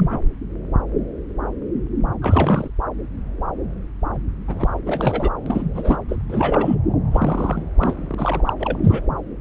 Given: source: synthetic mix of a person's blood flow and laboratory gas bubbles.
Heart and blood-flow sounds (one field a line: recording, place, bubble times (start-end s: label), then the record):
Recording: Doppler ultrasound of blood flow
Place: subclavian vein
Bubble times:
0.00-0.19 s: bubbles
2.21-2.71 s: bubbles
4.47-4.68 s: bubbles
4.85-5.29 s: bubbles
5.46-5.62 s: bubbles
5.74-5.97 s: bubbles
6.08-6.16 s: bubbles
6.29-6.75 s: bubbles
7.12-7.71 s: bubbles
7.77-8.14 s: bubbles
8.18-8.53 s: bubbles
8.60-8.78 s: bubbles
8.83-9.01 s: bubbles
From the record:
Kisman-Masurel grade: 332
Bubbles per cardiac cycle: rolling drumbeat, 9 or more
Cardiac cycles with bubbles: 50 to 99%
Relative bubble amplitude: moderate (0.250 to 0.450)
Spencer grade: 3 (all of the cardiac periods contain showers or single bubble signals, but not dominating or overriding the cardiac motion signals)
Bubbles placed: anywhere in the cardiac cycle